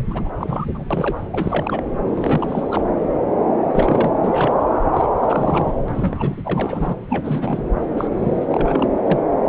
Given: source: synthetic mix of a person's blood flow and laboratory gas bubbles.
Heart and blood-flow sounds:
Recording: Doppler ultrasound of blood flow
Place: subclavian vein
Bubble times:
0.08-0.31 s: bubbles
0.40-0.86 s: bubbles
0.90-1.19 s: bubbles
1.31-1.83 s: bubbles
2.10-2.83 s: bubbles
3.71-4.12 s: bubbles
4.21-4.65 s: bubbles
4.93-5.08 s: bubbles
5.21-5.75 s: bubbles
5.88-6.96 s: bubbles
7.09-7.63 s: bubbles
7.97-8.07 s: bubbles
8.12-8.89 s: bubbles
8.98-9.00 s: bubbles
9.04-9.20 s: bubbles
From the record:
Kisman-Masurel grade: 332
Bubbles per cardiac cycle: rolling drumbeat, 9 or more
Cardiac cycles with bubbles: 50 to 99%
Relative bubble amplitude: moderate (0.250 to 0.450)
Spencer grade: 3 (all of the cardiac periods contain showers or single bubble signals, but not dominating or overriding the cardiac motion signals)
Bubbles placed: anywhere in the cardiac cycle

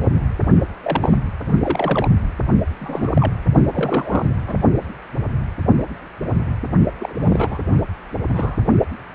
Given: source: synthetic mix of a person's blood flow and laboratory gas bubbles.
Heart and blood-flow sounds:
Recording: Doppler ultrasound of blood flow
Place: precordium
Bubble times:
0.83-1.17 s: bubbles
1.52-1.58 s: bubbles
1.62-2.08 s: bubbles
2.79-3.11 s: bubbles
3.14-3.33 s: bubbles
3.73-4.29 s: bubbles
4.47-4.58 s: bubbles
6.99-7.59 s: bubbles
7.70-7.75 s: bubbles
8.29-8.56 s: bubbles
From the record:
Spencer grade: 3 (all of the cardiac periods contain showers or single bubble signals, but not dominating or overriding the cardiac motion signals)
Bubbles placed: only in the low amplitude regions of the cardiac cycle

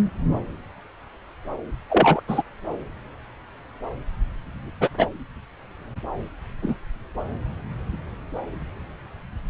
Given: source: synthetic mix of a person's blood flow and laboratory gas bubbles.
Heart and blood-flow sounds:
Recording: Doppler ultrasound of blood flow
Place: subclavian vein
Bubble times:
1.90-2.20 s: bubbles
2.27-2.42 s: bubbles
4.81-4.89 s: bubbles
4.97-5.08 s: bubbles
6.62-6.75 s: bubbles
From the record:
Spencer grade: 2 (many but less than half of the cardiac periods contain bubble signals, singularly or in groups)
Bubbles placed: anywhere in the cardiac cycle

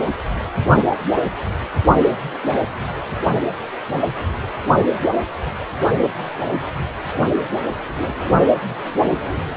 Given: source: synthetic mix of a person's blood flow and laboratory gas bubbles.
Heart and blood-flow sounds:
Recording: Doppler ultrasound of blood flow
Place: precordium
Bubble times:
2.42-2.64 s: bubbles
From the record:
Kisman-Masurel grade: 111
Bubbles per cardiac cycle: 1 to 2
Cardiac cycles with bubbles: 1 to 10%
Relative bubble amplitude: barely perceptible (0.100 to 0.250)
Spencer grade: 1 (occasional bubble signal discernible with the cardiac motion signal, with majority of cardiac periods free of bubbles)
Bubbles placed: only in the low amplitude regions of the cardiac cycle

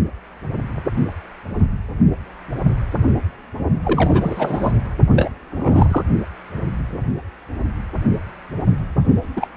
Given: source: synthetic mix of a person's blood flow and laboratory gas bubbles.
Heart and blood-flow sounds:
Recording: Doppler ultrasound of blood flow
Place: precordium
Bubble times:
3.83-4.74 s: bubbles
5.14-5.29 s: bubbles
5.50-6.04 s: bubbles
9.36-9.47 s: bubbles
From the record:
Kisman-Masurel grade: 222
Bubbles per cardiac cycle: several, 3 to 8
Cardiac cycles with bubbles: 10 to 50%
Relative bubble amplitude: moderate (0.250 to 0.450)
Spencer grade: 2 (many but less than half of the cardiac periods contain bubble signals, singularly or in groups)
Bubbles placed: only in the low amplitude regions of the cardiac cycle

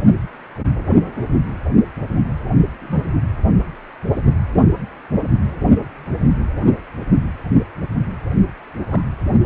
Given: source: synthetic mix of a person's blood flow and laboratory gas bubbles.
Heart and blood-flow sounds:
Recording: Doppler ultrasound of blood flow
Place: precordium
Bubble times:
2.81-3.10 s: bubbles
8.88-9.02 s: bubbles
From the record:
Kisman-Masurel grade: 121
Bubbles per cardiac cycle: 1 to 2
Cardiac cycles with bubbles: 10 to 50%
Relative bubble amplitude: barely perceptible (0.100 to 0.250)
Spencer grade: 2 (many but less than half of the cardiac periods contain bubble signals, singularly or in groups)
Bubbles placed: only in the low amplitude regions of the cardiac cycle

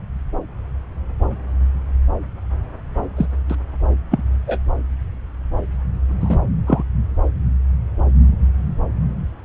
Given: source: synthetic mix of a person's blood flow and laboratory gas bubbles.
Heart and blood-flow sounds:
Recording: Doppler ultrasound of blood flow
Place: subclavian vein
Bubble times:
3.17-3.26 s: bubbles
3.50-3.55 s: bubbles
4.10-4.23 s: bubbles
4.47-4.59 s: bubbles
6.20-6.38 s: bubbles
6.67-6.83 s: bubbles
From the record:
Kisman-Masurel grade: 123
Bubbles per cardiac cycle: 1 to 2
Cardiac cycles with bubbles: 10 to 50%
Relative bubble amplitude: loud (0.450 to 0.775)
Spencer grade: 2 (many but less than half of the cardiac periods contain bubble signals, singularly or in groups)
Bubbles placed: anywhere in the cardiac cycle

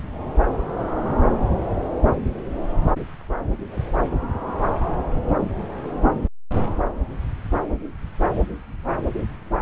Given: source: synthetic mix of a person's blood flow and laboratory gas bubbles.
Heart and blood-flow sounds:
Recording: Doppler ultrasound of blood flow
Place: subclavian vein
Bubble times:
no bubbles
From the record:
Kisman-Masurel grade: 000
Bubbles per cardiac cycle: 0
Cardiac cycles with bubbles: 0%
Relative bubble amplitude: no bubbles discernible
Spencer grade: 0 (complete lack of bubble signals)

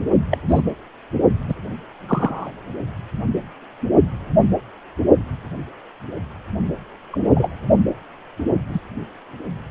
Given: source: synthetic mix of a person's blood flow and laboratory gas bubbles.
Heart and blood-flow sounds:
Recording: Doppler ultrasound of blood flow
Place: precordium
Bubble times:
0.31-0.38 s: bubbles
0.48-0.61 s: bubbles
1.48-1.55 s: bubbles
2.08-2.52 s: bubbles
7.11-7.49 s: bubbles
8.73-8.79 s: bubbles
From the record:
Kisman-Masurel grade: 122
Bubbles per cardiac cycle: 1 to 2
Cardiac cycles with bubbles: 10 to 50%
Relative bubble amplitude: moderate (0.250 to 0.450)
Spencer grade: 2 (many but less than half of the cardiac periods contain bubble signals, singularly or in groups)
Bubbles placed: only in the low amplitude regions of the cardiac cycle

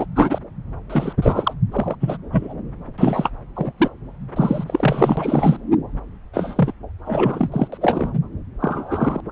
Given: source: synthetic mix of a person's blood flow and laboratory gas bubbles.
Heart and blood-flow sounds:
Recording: Doppler ultrasound of blood flow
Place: subclavian vein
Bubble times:
0.00-0.06 s: bubbles
0.16-0.38 s: bubbles
0.90-1.13 s: bubbles
1.22-1.53 s: bubbles
1.71-1.96 s: bubbles
2.00-2.17 s: bubbles
2.31-2.54 s: bubbles
2.98-3.30 s: bubbles
3.56-3.72 s: bubbles
3.77-3.89 s: bubbles
4.36-4.64 s: bubbles
4.68-5.57 s: bubbles
6.33-6.73 s: bubbles
7.06-7.50 s: bubbles
7.52-7.68 s: bubbles
7.72-7.78 s: bubbles
7.81-8.20 s: bubbles
8.60-9.21 s: bubbles
From the record:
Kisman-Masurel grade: 243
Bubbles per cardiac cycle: several, 3 to 8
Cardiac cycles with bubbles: 100%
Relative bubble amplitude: loud (0.450 to 0.775)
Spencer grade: 3 (all of the cardiac periods contain showers or single bubble signals, but not dominating or overriding the cardiac motion signals)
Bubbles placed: anywhere in the cardiac cycle

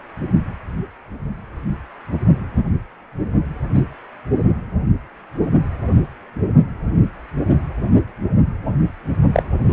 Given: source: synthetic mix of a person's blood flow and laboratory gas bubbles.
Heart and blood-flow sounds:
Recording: Doppler ultrasound of blood flow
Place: precordium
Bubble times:
3.73-3.81 s: bubbles
9.33-9.43 s: bubbles
9.64-9.73 s: bubbles
From the record:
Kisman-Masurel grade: 123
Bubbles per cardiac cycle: 1 to 2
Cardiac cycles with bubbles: 10 to 50%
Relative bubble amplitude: loud (0.450 to 0.775)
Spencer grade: 2 (many but less than half of the cardiac periods contain bubble signals, singularly or in groups)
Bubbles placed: only in the low amplitude regions of the cardiac cycle

